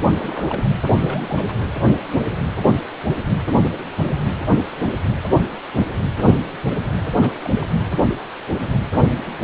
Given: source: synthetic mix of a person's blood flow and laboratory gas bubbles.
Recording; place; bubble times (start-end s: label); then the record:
Doppler ultrasound of blood flow; precordium
0.12-0.75 s: bubbles
0.88-1.45 s: bubbles
1.48-1.54 s: bubbles
7.21-7.34 s: bubbles
7.42-7.50 s: bubbles
7.54-7.69 s: bubbles
From the record:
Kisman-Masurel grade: 221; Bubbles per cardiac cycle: several, 3 to 8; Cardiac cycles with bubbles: 10 to 50%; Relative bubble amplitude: barely perceptible (0.100 to 0.250); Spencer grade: 2 (many but less than half of the cardiac periods contain bubble signals, singularly or in groups); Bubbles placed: anywhere in the cardiac cycle